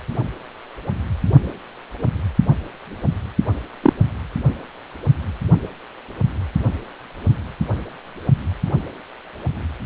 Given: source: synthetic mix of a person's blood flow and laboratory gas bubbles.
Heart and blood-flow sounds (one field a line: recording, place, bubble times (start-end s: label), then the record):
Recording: Doppler ultrasound of blood flow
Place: precordium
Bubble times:
3.82-3.93 s: bubbles
From the record:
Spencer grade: 1 (occasional bubble signal discernible with the cardiac motion signal, with majority of cardiac periods free of bubbles)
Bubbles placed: only in the low amplitude regions of the cardiac cycle